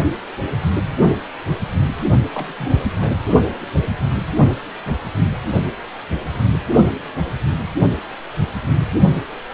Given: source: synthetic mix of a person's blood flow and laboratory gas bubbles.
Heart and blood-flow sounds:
Doppler ultrasound of blood flow; precordium
2.34-2.54 s: bubbles
2.58-2.86 s: bubbles
2.98-3.11 s: bubbles
From the record:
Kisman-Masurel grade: 211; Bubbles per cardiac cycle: several, 3 to 8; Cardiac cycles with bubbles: 1 to 10%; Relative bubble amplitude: barely perceptible (0.100 to 0.250); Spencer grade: 1 (occasional bubble signal discernible with the cardiac motion signal, with majority of cardiac periods free of bubbles); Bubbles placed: only in the low amplitude regions of the cardiac cycle

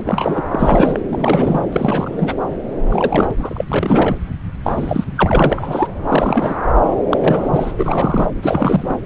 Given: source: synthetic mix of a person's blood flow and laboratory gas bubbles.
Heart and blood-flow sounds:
Doppler ultrasound of blood flow; subclavian vein
0.06-0.43 s: bubbles
0.51-1.00 s: bubbles
1.10-1.61 s: bubbles
1.72-2.36 s: bubbles
2.89-3.31 s: bubbles
3.38-3.64 s: bubbles
3.71-4.17 s: bubbles
4.64-5.04 s: bubbles
5.15-5.88 s: bubbles
6.08-6.54 s: bubbles
7.10-7.17 s: bubbles
7.20-7.71 s: bubbles
7.77-8.29 s: bubbles
8.42-8.99 s: bubbles
From the record:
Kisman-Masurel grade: 343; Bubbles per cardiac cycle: rolling drumbeat, 9 or more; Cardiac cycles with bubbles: 100%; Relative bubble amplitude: loud (0.450 to 0.775); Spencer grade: 3 (all of the cardiac periods contain showers or single bubble signals, but not dominating or overriding the cardiac motion signals); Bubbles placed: anywhere in the cardiac cycle

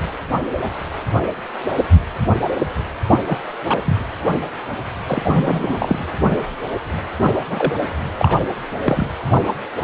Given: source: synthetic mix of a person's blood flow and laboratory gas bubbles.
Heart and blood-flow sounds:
Doppler ultrasound of blood flow; precordium
3.09-3.20 s: bubbles
3.27-3.39 s: bubbles
3.68-3.97 s: bubbles
5.08-6.04 s: bubbles
7.23-7.33 s: bubbles
7.50-7.73 s: bubbles
8.17-8.38 s: bubbles
8.84-9.07 s: bubbles
9.33-9.41 s: bubbles
9.81-9.84 s: bubbles
From the record:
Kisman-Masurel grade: 233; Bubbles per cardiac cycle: several, 3 to 8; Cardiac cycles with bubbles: 50 to 99%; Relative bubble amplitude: loud (0.450 to 0.775); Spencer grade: 3 (all of the cardiac periods contain showers or single bubble signals, but not dominating or overriding the cardiac motion signals); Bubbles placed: anywhere in the cardiac cycle

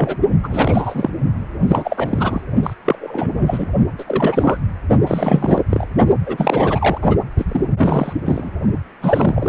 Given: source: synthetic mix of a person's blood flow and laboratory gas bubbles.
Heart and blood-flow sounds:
Doppler ultrasound of blood flow; precordium
0.00-0.17 s: bubbles
0.43-1.10 s: bubbles
1.67-2.42 s: bubbles
2.62-2.74 s: bubbles
2.85-3.67 s: bubbles
3.98-4.04 s: bubbles
4.07-4.57 s: bubbles
5.07-5.62 s: bubbles
5.70-5.86 s: bubbles
6.26-6.99 s: bubbles
7.02-7.17 s: bubbles
7.38-7.45 s: bubbles
7.48-7.66 s: bubbles
7.78-8.13 s: bubbles
8.25-8.50 s: bubbles
9.01-9.48 s: bubbles
From the record:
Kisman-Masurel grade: 343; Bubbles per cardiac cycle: rolling drumbeat, 9 or more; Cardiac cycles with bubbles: 100%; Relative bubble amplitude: loud (0.450 to 0.775); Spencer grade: 3 (all of the cardiac periods contain showers or single bubble signals, but not dominating or overriding the cardiac motion signals); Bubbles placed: only in the low amplitude regions of the cardiac cycle

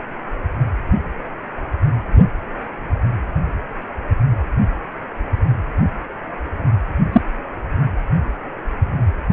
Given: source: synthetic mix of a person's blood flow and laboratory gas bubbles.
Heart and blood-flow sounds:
Doppler ultrasound of blood flow; precordium
7.12-7.21 s: bubbles
From the record:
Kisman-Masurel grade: 113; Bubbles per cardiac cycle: 1 to 2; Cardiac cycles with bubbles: 1 to 10%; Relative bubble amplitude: loud (0.450 to 0.775); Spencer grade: 1 (occasional bubble signal discernible with the cardiac motion signal, with majority of cardiac periods free of bubbles); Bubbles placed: anywhere in the cardiac cycle

